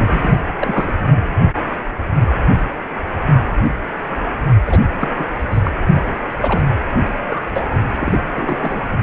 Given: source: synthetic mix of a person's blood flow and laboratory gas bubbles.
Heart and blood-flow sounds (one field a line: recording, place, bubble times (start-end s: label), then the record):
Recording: Doppler ultrasound of blood flow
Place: precordium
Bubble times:
0.00-0.40 s: bubbles
0.59-0.92 s: bubbles
4.66-4.79 s: bubbles
4.99-5.08 s: bubbles
5.18-5.25 s: bubbles
5.50-5.61 s: bubbles
5.64-5.71 s: bubbles
5.95-6.00 s: bubbles
6.40-6.63 s: bubbles
7.26-7.42 s: bubbles
7.54-7.80 s: bubbles
8.00-8.85 s: bubbles
From the record:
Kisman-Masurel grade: 232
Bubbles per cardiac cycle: several, 3 to 8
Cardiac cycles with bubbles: 50 to 99%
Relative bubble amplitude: moderate (0.250 to 0.450)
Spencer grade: 3 (all of the cardiac periods contain showers or single bubble signals, but not dominating or overriding the cardiac motion signals)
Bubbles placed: anywhere in the cardiac cycle